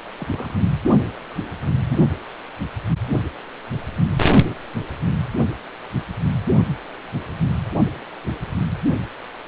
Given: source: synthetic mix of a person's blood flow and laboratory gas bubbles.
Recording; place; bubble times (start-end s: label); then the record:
Doppler ultrasound of blood flow; precordium
0.19-0.59 s: bubbles
1.90-2.00 s: bubbles
From the record:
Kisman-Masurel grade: 121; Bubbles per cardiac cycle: 1 to 2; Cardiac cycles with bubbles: 10 to 50%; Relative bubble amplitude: barely perceptible (0.100 to 0.250); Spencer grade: 2 (many but less than half of the cardiac periods contain bubble signals, singularly or in groups); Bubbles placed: only in the low amplitude regions of the cardiac cycle